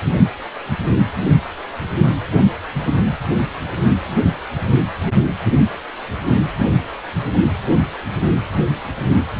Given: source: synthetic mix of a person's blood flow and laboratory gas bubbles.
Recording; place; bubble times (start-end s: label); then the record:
Doppler ultrasound of blood flow; precordium
no bubbles
From the record:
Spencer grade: 0 (complete lack of bubble signals)